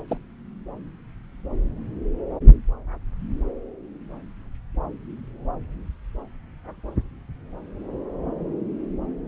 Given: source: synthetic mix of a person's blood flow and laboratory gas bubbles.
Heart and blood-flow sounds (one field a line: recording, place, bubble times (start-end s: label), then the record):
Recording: Doppler ultrasound of blood flow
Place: subclavian vein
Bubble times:
0.08-0.17 s: bubbles
From the record:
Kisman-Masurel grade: 121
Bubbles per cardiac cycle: 1 to 2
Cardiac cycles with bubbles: 10 to 50%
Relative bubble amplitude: barely perceptible (0.100 to 0.250)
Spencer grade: 2 (many but less than half of the cardiac periods contain bubble signals, singularly or in groups)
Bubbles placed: anywhere in the cardiac cycle